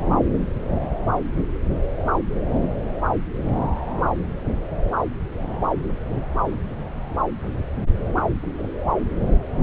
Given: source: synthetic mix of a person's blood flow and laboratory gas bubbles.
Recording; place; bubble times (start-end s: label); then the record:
Doppler ultrasound of blood flow; subclavian vein
8.16-8.22 s: bubbles
8.56-8.71 s: bubbles
From the record:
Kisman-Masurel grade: 111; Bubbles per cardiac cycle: 1 to 2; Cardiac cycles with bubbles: 1 to 10%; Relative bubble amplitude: barely perceptible (0.100 to 0.250); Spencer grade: 1 (occasional bubble signal discernible with the cardiac motion signal, with majority of cardiac periods free of bubbles); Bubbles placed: anywhere in the cardiac cycle